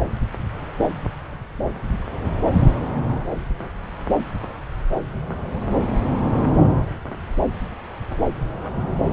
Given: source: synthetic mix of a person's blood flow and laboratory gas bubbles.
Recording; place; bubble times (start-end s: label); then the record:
Doppler ultrasound of blood flow; subclavian vein
no bubbles
From the record:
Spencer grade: 0 (complete lack of bubble signals)